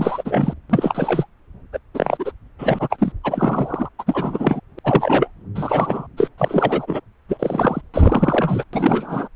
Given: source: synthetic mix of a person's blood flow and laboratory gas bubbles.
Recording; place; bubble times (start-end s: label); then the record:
Doppler ultrasound of blood flow; subclavian vein
0.00-0.22 s: bubbles
0.25-0.54 s: bubbles
0.69-1.26 s: bubbles
1.73-1.79 s: bubbles
1.94-2.31 s: bubbles
2.58-3.12 s: bubbles
3.23-3.89 s: bubbles
3.98-4.03 s: bubbles
4.06-4.60 s: bubbles
4.77-4.79 s: bubbles
4.84-5.29 s: bubbles
5.55-6.07 s: bubbles
6.17-6.28 s: bubbles
6.38-7.00 s: bubbles
7.28-7.81 s: bubbles
7.94-8.63 s: bubbles
8.73-9.28 s: bubbles
From the record:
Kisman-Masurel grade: 342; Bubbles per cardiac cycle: rolling drumbeat, 9 or more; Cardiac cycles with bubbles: 100%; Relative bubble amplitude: moderate (0.250 to 0.450); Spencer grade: 3 (all of the cardiac periods contain showers or single bubble signals, but not dominating or overriding the cardiac motion signals); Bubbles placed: anywhere in the cardiac cycle